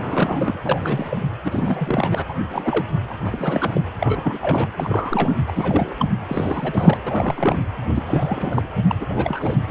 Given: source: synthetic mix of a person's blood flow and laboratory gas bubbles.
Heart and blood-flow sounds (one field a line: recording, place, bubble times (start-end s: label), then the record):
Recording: Doppler ultrasound of blood flow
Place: precordium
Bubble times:
0.00-0.59 s: bubbles
0.64-1.22 s: bubbles
1.45-2.23 s: bubbles
2.28-2.44 s: bubbles
2.50-2.86 s: bubbles
3.09-3.14 s: bubbles
3.25-3.81 s: bubbles
3.98-4.70 s: bubbles
4.79-5.35 s: bubbles
5.46-5.52 s: bubbles
5.55-5.96 s: bubbles
5.99-6.08 s: bubbles
6.29-6.98 s: bubbles
7.06-7.58 s: bubbles
7.95-8.62 s: bubbles
8.88-8.95 s: bubbles
8.99-9.56 s: bubbles
9.68-9.71 s: bubbles
From the record:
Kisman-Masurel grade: 342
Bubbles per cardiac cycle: rolling drumbeat, 9 or more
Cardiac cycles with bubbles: 100%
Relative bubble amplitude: moderate (0.250 to 0.450)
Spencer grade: 3 (all of the cardiac periods contain showers or single bubble signals, but not dominating or overriding the cardiac motion signals)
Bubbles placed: anywhere in the cardiac cycle